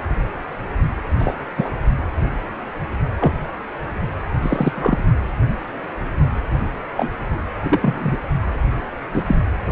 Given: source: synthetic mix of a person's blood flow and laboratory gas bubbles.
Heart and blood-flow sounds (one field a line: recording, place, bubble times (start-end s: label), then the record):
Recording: Doppler ultrasound of blood flow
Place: precordium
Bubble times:
1.18-1.34 s: bubbles
1.57-1.70 s: bubbles
3.20-3.33 s: bubbles
4.42-4.72 s: bubbles
4.75-5.02 s: bubbles
6.97-7.09 s: bubbles
7.62-8.17 s: bubbles
9.13-9.23 s: bubbles
9.27-9.37 s: bubbles
From the record:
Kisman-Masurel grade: 122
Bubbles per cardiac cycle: 1 to 2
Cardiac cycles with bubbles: 10 to 50%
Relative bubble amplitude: moderate (0.250 to 0.450)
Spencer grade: 2 (many but less than half of the cardiac periods contain bubble signals, singularly or in groups)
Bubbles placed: anywhere in the cardiac cycle